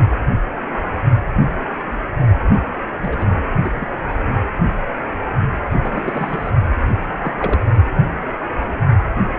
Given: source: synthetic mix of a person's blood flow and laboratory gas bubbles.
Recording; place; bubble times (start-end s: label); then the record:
Doppler ultrasound of blood flow; precordium
2.99-3.28 s: bubbles
3.62-3.72 s: bubbles
3.79-3.88 s: bubbles
5.81-6.51 s: bubbles
7.20-7.34 s: bubbles
7.39-7.65 s: bubbles
From the record:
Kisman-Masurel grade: 221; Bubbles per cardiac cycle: several, 3 to 8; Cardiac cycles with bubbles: 10 to 50%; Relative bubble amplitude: barely perceptible (0.100 to 0.250); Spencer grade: 2 (many but less than half of the cardiac periods contain bubble signals, singularly or in groups); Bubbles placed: only in the low amplitude regions of the cardiac cycle